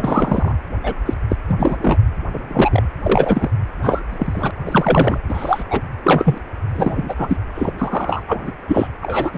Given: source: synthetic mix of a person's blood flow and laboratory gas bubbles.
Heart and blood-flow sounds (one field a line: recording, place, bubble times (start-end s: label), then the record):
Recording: Doppler ultrasound of blood flow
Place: precordium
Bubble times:
0.00-0.52 s: bubbles
0.83-0.94 s: bubbles
1.05-1.14 s: bubbles
1.29-1.36 s: bubbles
1.48-1.55 s: bubbles
1.58-1.77 s: bubbles
1.81-1.98 s: bubbles
2.33-2.40 s: bubbles
2.48-2.83 s: bubbles
3.02-3.48 s: bubbles
3.82-4.02 s: bubbles
4.09-4.51 s: bubbles
4.66-5.18 s: bubbles
5.28-5.63 s: bubbles
5.71-5.81 s: bubbles
6.04-6.39 s: bubbles
6.74-7.15 s: bubbles
7.18-7.37 s: bubbles
7.54-7.71 s: bubbles
7.78-8.23 s: bubbles
8.27-8.51 s: bubbles
8.68-8.88 s: bubbles
9.02-9.38 s: bubbles
From the record:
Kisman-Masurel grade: 233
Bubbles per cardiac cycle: several, 3 to 8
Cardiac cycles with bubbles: 50 to 99%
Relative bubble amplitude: loud (0.450 to 0.775)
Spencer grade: 3 (all of the cardiac periods contain showers or single bubble signals, but not dominating or overriding the cardiac motion signals)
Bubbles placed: anywhere in the cardiac cycle